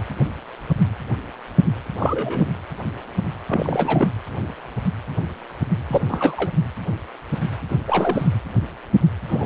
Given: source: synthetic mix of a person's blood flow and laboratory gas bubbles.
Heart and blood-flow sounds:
Doppler ultrasound of blood flow; precordium
1.98-2.49 s: bubbles
3.48-4.08 s: bubbles
5.89-6.01 s: bubbles
6.08-6.50 s: bubbles
7.70-7.75 s: bubbles
7.87-8.31 s: bubbles
9.28-9.46 s: bubbles
From the record:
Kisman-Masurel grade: 222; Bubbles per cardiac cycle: several, 3 to 8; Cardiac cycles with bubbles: 10 to 50%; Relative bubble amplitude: moderate (0.250 to 0.450); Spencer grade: 2 (many but less than half of the cardiac periods contain bubble signals, singularly or in groups); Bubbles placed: anywhere in the cardiac cycle

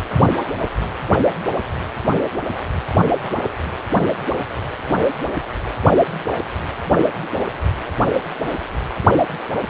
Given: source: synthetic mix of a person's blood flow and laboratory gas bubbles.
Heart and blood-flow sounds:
Doppler ultrasound of blood flow; precordium
3.21-3.49 s: bubbles
From the record:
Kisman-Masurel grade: 112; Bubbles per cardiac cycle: 1 to 2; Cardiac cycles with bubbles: 1 to 10%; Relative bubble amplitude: moderate (0.250 to 0.450); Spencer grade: 1 (occasional bubble signal discernible with the cardiac motion signal, with majority of cardiac periods free of bubbles); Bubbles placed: only in the low amplitude regions of the cardiac cycle

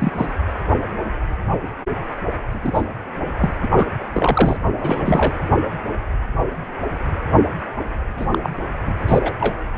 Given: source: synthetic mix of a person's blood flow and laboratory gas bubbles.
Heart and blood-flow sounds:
Doppler ultrasound of blood flow; precordium
0.00-0.30 s: bubbles
2.52-2.85 s: bubbles
3.38-3.52 s: bubbles
3.62-3.67 s: bubbles
3.75-3.87 s: bubbles
4.14-4.57 s: bubbles
4.80-5.33 s: bubbles
8.17-8.26 s: bubbles
8.30-8.38 s: bubbles
8.42-8.50 s: bubbles
8.86-8.95 s: bubbles
9.07-9.32 s: bubbles
9.40-9.55 s: bubbles
From the record:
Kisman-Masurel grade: 222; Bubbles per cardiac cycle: several, 3 to 8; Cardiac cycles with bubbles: 10 to 50%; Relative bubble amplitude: moderate (0.250 to 0.450); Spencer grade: 2 (many but less than half of the cardiac periods contain bubble signals, singularly or in groups); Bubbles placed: anywhere in the cardiac cycle

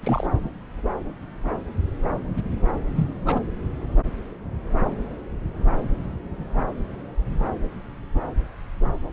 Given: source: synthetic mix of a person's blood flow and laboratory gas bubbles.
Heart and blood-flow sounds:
Doppler ultrasound of blood flow; subclavian vein
0.03-0.27 s: bubbles
2.96-3.07 s: bubbles
3.25-3.40 s: bubbles
From the record:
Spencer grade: 1 (occasional bubble signal discernible with the cardiac motion signal, with majority of cardiac periods free of bubbles); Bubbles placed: anywhere in the cardiac cycle

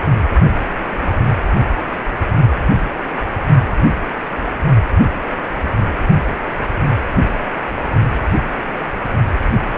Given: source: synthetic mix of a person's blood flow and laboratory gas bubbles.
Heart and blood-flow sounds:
Doppler ultrasound of blood flow; precordium
0.93-1.14 s: bubbles
From the record:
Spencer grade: 2 (many but less than half of the cardiac periods contain bubble signals, singularly or in groups); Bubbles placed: only in the low amplitude regions of the cardiac cycle

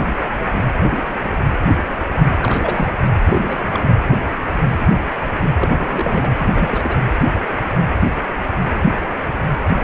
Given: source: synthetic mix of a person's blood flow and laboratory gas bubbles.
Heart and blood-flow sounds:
Doppler ultrasound of blood flow; precordium
2.42-2.91 s: bubbles
3.31-3.84 s: bubbles
5.59-5.69 s: bubbles
5.77-6.97 s: bubbles
From the record:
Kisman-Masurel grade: 222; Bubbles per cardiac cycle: several, 3 to 8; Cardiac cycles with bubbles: 10 to 50%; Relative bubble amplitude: moderate (0.250 to 0.450); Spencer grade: 2 (many but less than half of the cardiac periods contain bubble signals, singularly or in groups); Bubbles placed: anywhere in the cardiac cycle

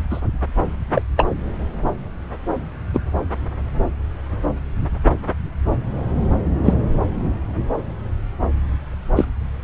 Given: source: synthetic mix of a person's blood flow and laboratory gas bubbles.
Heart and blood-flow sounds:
Doppler ultrasound of blood flow; subclavian vein
0.10-0.21 s: bubbles
0.95-1.02 s: bubbles
1.17-1.26 s: bubbles
2.93-3.00 s: bubbles
6.63-6.75 s: bubbles
9.16-9.24 s: bubbles
From the record:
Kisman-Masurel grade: 123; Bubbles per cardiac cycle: 1 to 2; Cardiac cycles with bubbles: 10 to 50%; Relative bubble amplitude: loud (0.450 to 0.775); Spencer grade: 2 (many but less than half of the cardiac periods contain bubble signals, singularly or in groups); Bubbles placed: anywhere in the cardiac cycle

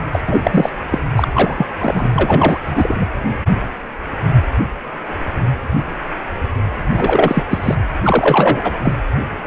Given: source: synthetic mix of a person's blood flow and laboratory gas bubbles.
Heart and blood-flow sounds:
Doppler ultrasound of blood flow; precordium
0.12-0.21 s: bubbles
0.27-0.70 s: bubbles
0.89-1.00 s: bubbles
1.16-1.28 s: bubbles
1.33-1.66 s: bubbles
1.79-2.09 s: bubbles
2.12-2.60 s: bubbles
2.67-3.06 s: bubbles
6.91-7.43 s: bubbles
7.50-7.75 s: bubbles
8.03-8.73 s: bubbles
8.83-8.96 s: bubbles
From the record:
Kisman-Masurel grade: 333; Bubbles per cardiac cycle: rolling drumbeat, 9 or more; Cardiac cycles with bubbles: 50 to 99%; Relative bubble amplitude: loud (0.450 to 0.775); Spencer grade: 3 (all of the cardiac periods contain showers or single bubble signals, but not dominating or overriding the cardiac motion signals); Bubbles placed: anywhere in the cardiac cycle

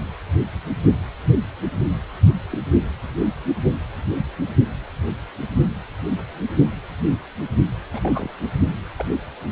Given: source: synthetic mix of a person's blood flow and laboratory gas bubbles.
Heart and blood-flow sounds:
Doppler ultrasound of blood flow; precordium
2.50-2.58 s: bubbles
7.92-8.00 s: bubbles
8.02-8.30 s: bubbles
8.98-9.04 s: bubbles
From the record:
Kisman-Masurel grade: 121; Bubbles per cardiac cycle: 1 to 2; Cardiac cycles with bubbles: 10 to 50%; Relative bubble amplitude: barely perceptible (0.100 to 0.250); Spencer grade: 2 (many but less than half of the cardiac periods contain bubble signals, singularly or in groups); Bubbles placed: only in the low amplitude regions of the cardiac cycle

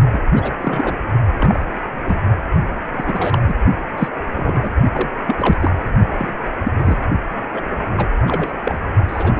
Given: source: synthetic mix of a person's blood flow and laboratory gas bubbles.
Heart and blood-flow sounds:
Doppler ultrasound of blood flow; precordium
0.12-0.22 s: bubbles
0.33-0.51 s: bubbles
0.61-1.03 s: bubbles
1.38-1.67 s: bubbles
2.05-2.20 s: bubbles
2.92-3.38 s: bubbles
3.46-3.54 s: bubbles
3.98-4.08 s: bubbles
4.34-4.69 s: bubbles
4.93-5.10 s: bubbles
5.25-5.35 s: bubbles
5.38-5.70 s: bubbles
6.17-6.33 s: bubbles
6.64-6.72 s: bubbles
6.78-7.02 s: bubbles
7.53-7.61 s: bubbles
7.97-8.06 s: bubbles
8.27-8.53 s: bubbles
8.65-8.79 s: bubbles
9.08-9.40 s: bubbles
From the record:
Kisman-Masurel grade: 242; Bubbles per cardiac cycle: several, 3 to 8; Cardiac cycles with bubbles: 100%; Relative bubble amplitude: moderate (0.250 to 0.450); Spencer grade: 3 (all of the cardiac periods contain showers or single bubble signals, but not dominating or overriding the cardiac motion signals); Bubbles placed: only in the low amplitude regions of the cardiac cycle

